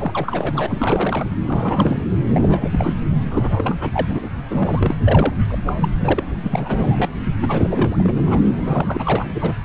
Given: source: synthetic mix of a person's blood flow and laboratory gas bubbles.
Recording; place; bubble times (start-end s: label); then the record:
Doppler ultrasound of blood flow; subclavian vein
0.00-1.26 s: bubbles
1.30-1.35 s: bubbles
1.46-2.07 s: bubbles
2.34-2.95 s: bubbles
3.31-3.50 s: bubbles
3.58-3.75 s: bubbles
3.80-4.29 s: bubbles
4.50-4.96 s: bubbles
5.04-5.34 s: bubbles
5.48-5.57 s: bubbles
5.65-5.73 s: bubbles
5.76-5.92 s: bubbles
6.00-6.23 s: bubbles
6.42-7.08 s: bubbles
7.41-8.12 s: bubbles
8.16-8.21 s: bubbles
8.26-8.41 s: bubbles
8.59-9.56 s: bubbles
From the record:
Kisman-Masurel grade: 342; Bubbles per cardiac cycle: rolling drumbeat, 9 or more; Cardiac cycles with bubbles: 100%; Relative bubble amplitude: moderate (0.250 to 0.450); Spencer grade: 3 (all of the cardiac periods contain showers or single bubble signals, but not dominating or overriding the cardiac motion signals); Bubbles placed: anywhere in the cardiac cycle